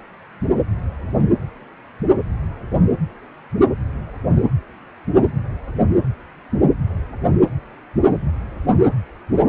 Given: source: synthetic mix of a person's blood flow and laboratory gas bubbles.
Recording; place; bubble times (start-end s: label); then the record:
Doppler ultrasound of blood flow; precordium
no bubbles
From the record:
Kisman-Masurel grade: 000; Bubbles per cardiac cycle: 0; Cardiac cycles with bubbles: 0%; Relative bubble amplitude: no bubbles discernible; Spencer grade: 0 (complete lack of bubble signals)